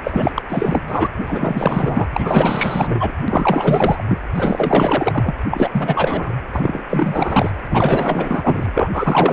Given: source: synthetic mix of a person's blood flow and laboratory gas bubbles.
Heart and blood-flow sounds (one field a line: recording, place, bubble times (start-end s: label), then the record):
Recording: Doppler ultrasound of blood flow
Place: precordium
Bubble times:
0.04-0.31 s: bubbles
0.34-0.42 s: bubbles
0.48-0.81 s: bubbles
0.87-1.08 s: bubbles
1.19-2.07 s: bubbles
2.13-3.12 s: bubbles
3.29-4.02 s: bubbles
4.08-4.18 s: bubbles
4.35-5.34 s: bubbles
5.50-6.34 s: bubbles
6.53-6.83 s: bubbles
6.90-7.50 s: bubbles
7.70-8.71 s: bubbles
8.74-8.90 s: bubbles
8.92-9.33 s: bubbles
From the record:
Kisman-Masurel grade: 444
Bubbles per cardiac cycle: continuous sound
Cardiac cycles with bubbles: 100%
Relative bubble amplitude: maximal (0.775 to 0.999)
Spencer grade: 4 (maximum detectable bubble signal sounding continuously throughout systole and diastole of every cardiac period, and overriding the amplitude of the normal cardiac signals)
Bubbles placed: anywhere in the cardiac cycle